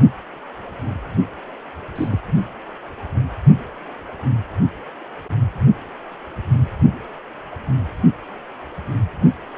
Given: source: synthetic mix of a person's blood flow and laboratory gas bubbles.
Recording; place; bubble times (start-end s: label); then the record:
Doppler ultrasound of blood flow; precordium
1.95-2.08 s: bubbles
2.11-2.19 s: bubbles
From the record:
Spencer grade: 1 (occasional bubble signal discernible with the cardiac motion signal, with majority of cardiac periods free of bubbles); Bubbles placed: only in the low amplitude regions of the cardiac cycle